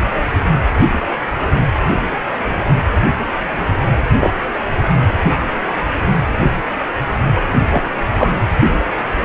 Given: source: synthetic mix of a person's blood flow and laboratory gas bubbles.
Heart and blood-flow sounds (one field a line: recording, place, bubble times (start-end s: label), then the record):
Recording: Doppler ultrasound of blood flow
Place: precordium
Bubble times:
4.19-4.30 s: bubbles
7.70-7.83 s: bubbles
8.17-8.30 s: bubbles
From the record:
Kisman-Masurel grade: 123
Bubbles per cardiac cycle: 1 to 2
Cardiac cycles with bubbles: 10 to 50%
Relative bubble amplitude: loud (0.450 to 0.775)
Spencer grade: 2 (many but less than half of the cardiac periods contain bubble signals, singularly or in groups)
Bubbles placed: anywhere in the cardiac cycle